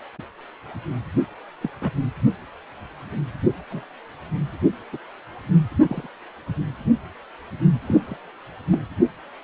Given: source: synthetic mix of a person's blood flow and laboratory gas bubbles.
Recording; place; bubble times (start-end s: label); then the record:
Doppler ultrasound of blood flow; precordium
1.61-1.70 s: bubbles
1.81-1.91 s: bubbles
3.70-3.83 s: bubbles
4.92-4.97 s: bubbles
5.89-6.07 s: bubbles
7.81-8.17 s: bubbles
8.71-8.79 s: bubbles
From the record:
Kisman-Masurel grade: 121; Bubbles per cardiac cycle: 1 to 2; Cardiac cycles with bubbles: 10 to 50%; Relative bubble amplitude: barely perceptible (0.100 to 0.250); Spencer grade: 2 (many but less than half of the cardiac periods contain bubble signals, singularly or in groups); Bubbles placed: anywhere in the cardiac cycle